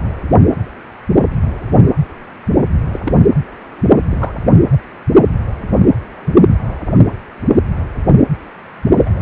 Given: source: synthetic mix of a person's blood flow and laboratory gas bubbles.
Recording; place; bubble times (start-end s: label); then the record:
Doppler ultrasound of blood flow; precordium
2.92-3.00 s: bubbles
3.04-3.13 s: bubbles
4.11-4.33 s: bubbles
4.71-4.78 s: bubbles
8.99-9.22 s: bubbles
From the record:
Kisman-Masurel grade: 122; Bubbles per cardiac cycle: 1 to 2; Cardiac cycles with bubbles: 10 to 50%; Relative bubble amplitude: moderate (0.250 to 0.450); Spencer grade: 2 (many but less than half of the cardiac periods contain bubble signals, singularly or in groups); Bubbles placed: anywhere in the cardiac cycle